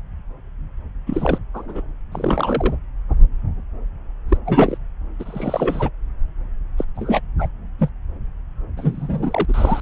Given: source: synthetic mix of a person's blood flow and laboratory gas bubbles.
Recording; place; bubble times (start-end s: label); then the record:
Doppler ultrasound of blood flow; subclavian vein
1.06-1.38 s: bubbles
1.54-1.81 s: bubbles
2.12-2.75 s: bubbles
4.29-4.38 s: bubbles
4.45-4.78 s: bubbles
5.19-5.90 s: bubbles
6.78-6.84 s: bubbles
6.95-7.21 s: bubbles
7.38-7.47 s: bubbles
7.79-7.90 s: bubbles
8.76-9.45 s: bubbles
9.48-9.80 s: bubbles
From the record:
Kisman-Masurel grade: 232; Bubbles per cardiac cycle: several, 3 to 8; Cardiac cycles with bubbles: 50 to 99%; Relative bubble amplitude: moderate (0.250 to 0.450); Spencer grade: 3 (all of the cardiac periods contain showers or single bubble signals, but not dominating or overriding the cardiac motion signals); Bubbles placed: anywhere in the cardiac cycle